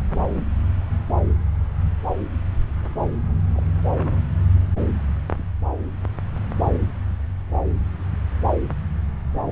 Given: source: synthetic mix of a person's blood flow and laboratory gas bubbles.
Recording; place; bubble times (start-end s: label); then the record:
Doppler ultrasound of blood flow; subclavian vein
0.35-0.43 s: bubbles
3.54-3.62 s: bubbles
3.98-4.14 s: bubbles
5.38-5.43 s: bubbles
From the record:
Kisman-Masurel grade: 121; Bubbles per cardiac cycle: 1 to 2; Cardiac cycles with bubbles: 10 to 50%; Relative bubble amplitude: barely perceptible (0.100 to 0.250); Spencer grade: 2 (many but less than half of the cardiac periods contain bubble signals, singularly or in groups); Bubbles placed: anywhere in the cardiac cycle